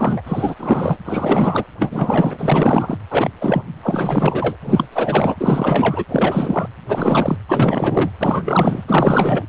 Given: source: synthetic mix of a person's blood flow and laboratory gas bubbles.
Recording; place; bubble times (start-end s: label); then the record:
Doppler ultrasound of blood flow; precordium
0.00-0.22 s: bubbles
0.26-0.56 s: bubbles
0.58-0.97 s: bubbles
1.04-1.66 s: bubbles
1.79-2.97 s: bubbles
3.10-3.29 s: bubbles
3.41-3.66 s: bubbles
3.83-4.57 s: bubbles
4.61-4.88 s: bubbles
4.92-5.35 s: bubbles
5.39-6.04 s: bubbles
6.08-6.68 s: bubbles
6.88-7.38 s: bubbles
7.48-8.12 s: bubbles
8.20-8.83 s: bubbles
8.88-9.46 s: bubbles
From the record:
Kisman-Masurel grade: 444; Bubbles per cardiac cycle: continuous sound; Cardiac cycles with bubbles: 100%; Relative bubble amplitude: maximal (0.775 to 0.999); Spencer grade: 4 (maximum detectable bubble signal sounding continuously throughout systole and diastole of every cardiac period, and overriding the amplitude of the normal cardiac signals); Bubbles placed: anywhere in the cardiac cycle